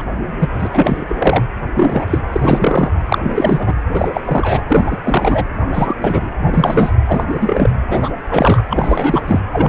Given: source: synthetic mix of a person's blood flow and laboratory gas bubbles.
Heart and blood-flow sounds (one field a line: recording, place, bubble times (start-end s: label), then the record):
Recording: Doppler ultrasound of blood flow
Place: precordium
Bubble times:
0.00-0.05 s: bubbles
0.39-0.49 s: bubbles
0.59-0.68 s: bubbles
0.72-1.05 s: bubbles
1.08-1.44 s: bubbles
1.75-2.21 s: bubbles
2.32-2.92 s: bubbles
3.06-3.73 s: bubbles
3.93-4.08 s: bubbles
4.13-4.21 s: bubbles
4.24-4.63 s: bubbles
4.68-4.98 s: bubbles
5.04-5.45 s: bubbles
5.71-5.96 s: bubbles
6.00-6.30 s: bubbles
6.46-6.92 s: bubbles
7.06-7.24 s: bubbles
7.29-7.71 s: bubbles
7.87-8.10 s: bubbles
8.29-8.62 s: bubbles
8.70-9.39 s: bubbles
9.52-9.69 s: bubbles
From the record:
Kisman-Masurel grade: 343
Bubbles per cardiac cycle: rolling drumbeat, 9 or more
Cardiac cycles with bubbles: 100%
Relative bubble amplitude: loud (0.450 to 0.775)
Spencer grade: 3 (all of the cardiac periods contain showers or single bubble signals, but not dominating or overriding the cardiac motion signals)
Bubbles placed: anywhere in the cardiac cycle